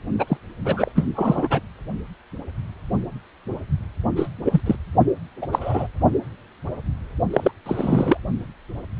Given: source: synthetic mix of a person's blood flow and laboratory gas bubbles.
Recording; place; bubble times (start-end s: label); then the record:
Doppler ultrasound of blood flow; precordium
0.19-0.37 s: bubbles
0.64-0.92 s: bubbles
0.95-1.05 s: bubbles
1.15-1.60 s: bubbles
4.16-4.29 s: bubbles
4.45-4.61 s: bubbles
4.66-4.75 s: bubbles
5.42-5.46 s: bubbles
5.52-5.87 s: bubbles
7.33-7.51 s: bubbles
7.66-8.17 s: bubbles
From the record:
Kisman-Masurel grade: 222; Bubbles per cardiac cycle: several, 3 to 8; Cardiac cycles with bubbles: 10 to 50%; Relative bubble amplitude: moderate (0.250 to 0.450); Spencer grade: 2 (many but less than half of the cardiac periods contain bubble signals, singularly or in groups); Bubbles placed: only in the low amplitude regions of the cardiac cycle